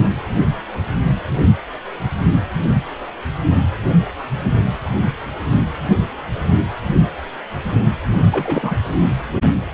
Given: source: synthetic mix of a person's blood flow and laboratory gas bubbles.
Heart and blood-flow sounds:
Doppler ultrasound of blood flow; precordium
8.12-8.18 s: bubbles
8.31-8.75 s: bubbles
From the record:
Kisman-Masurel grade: 222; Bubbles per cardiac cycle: several, 3 to 8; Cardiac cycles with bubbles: 10 to 50%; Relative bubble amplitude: moderate (0.250 to 0.450); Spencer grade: 2 (many but less than half of the cardiac periods contain bubble signals, singularly or in groups); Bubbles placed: anywhere in the cardiac cycle

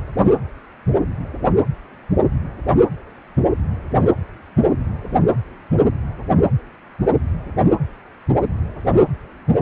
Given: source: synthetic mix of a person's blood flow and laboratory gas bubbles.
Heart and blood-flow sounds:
Doppler ultrasound of blood flow; precordium
no bubbles
From the record:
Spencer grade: 0 (complete lack of bubble signals)

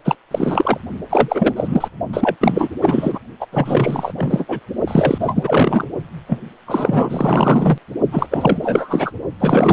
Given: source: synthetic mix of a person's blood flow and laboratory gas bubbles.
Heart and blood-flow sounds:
Doppler ultrasound of blood flow; precordium
0.04-0.15 s: bubbles
0.31-0.79 s: bubbles
1.10-1.88 s: bubbles
2.13-2.36 s: bubbles
2.41-2.69 s: bubbles
2.81-3.19 s: bubbles
3.40-3.46 s: bubbles
3.52-4.12 s: bubbles
4.17-4.45 s: bubbles
4.48-4.59 s: bubbles
4.87-5.84 s: bubbles
6.27-6.40 s: bubbles
6.67-7.78 s: bubbles
8.12-8.27 s: bubbles
8.30-8.57 s: bubbles
8.60-9.11 s: bubbles
9.40-9.73 s: bubbles
From the record:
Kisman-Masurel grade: 444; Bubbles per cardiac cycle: continuous sound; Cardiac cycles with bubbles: 100%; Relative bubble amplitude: maximal (0.775 to 0.999); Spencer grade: 4 (maximum detectable bubble signal sounding continuously throughout systole and diastole of every cardiac period, and overriding the amplitude of the normal cardiac signals); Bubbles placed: only in the low amplitude regions of the cardiac cycle

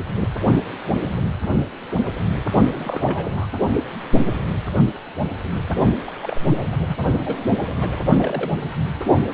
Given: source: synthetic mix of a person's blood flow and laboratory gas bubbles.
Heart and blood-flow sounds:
Doppler ultrasound of blood flow; precordium
0.00-0.03 s: bubbles
0.17-0.28 s: bubbles
2.75-3.47 s: bubbles
6.06-6.42 s: bubbles
6.71-6.76 s: bubbles
6.88-6.96 s: bubbles
7.25-7.38 s: bubbles
7.81-8.00 s: bubbles
8.16-8.51 s: bubbles
From the record:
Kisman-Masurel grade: 232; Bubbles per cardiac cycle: several, 3 to 8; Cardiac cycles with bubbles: 50 to 99%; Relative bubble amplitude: moderate (0.250 to 0.450); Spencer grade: 3 (all of the cardiac periods contain showers or single bubble signals, but not dominating or overriding the cardiac motion signals); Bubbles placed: only in the low amplitude regions of the cardiac cycle

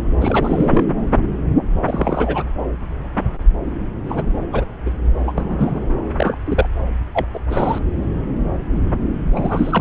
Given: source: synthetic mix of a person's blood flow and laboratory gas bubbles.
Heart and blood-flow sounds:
Doppler ultrasound of blood flow; subclavian vein
0.21-0.84 s: bubbles
1.84-2.43 s: bubbles
4.06-4.24 s: bubbles
4.52-4.65 s: bubbles
4.86-4.91 s: bubbles
5.27-5.32 s: bubbles
5.38-5.81 s: bubbles
6.17-6.38 s: bubbles
6.46-6.67 s: bubbles
7.13-7.25 s: bubbles
7.33-7.39 s: bubbles
7.50-7.79 s: bubbles
9.32-9.81 s: bubbles
From the record:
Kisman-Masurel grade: 232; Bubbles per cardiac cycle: several, 3 to 8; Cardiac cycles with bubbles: 50 to 99%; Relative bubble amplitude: moderate (0.250 to 0.450); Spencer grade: 3 (all of the cardiac periods contain showers or single bubble signals, but not dominating or overriding the cardiac motion signals); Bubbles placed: anywhere in the cardiac cycle

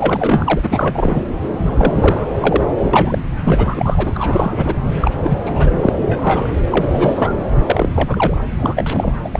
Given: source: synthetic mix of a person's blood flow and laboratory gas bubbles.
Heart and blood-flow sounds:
Doppler ultrasound of blood flow; subclavian vein
0.00-0.59 s: bubbles
0.62-1.24 s: bubbles
1.66-2.30 s: bubbles
2.40-2.67 s: bubbles
2.79-2.91 s: bubbles
2.93-3.32 s: bubbles
3.43-4.74 s: bubbles
5.01-5.11 s: bubbles
5.23-5.38 s: bubbles
5.46-5.93 s: bubbles
6.02-6.55 s: bubbles
6.70-7.33 s: bubbles
7.63-7.89 s: bubbles
7.96-8.37 s: bubbles
8.57-9.12 s: bubbles
9.24-9.29 s: bubbles
9.31-9.40 s: bubbles
From the record:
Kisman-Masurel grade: 342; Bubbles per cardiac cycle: rolling drumbeat, 9 or more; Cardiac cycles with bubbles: 100%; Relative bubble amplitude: moderate (0.250 to 0.450); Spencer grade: 3 (all of the cardiac periods contain showers or single bubble signals, but not dominating or overriding the cardiac motion signals); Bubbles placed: anywhere in the cardiac cycle

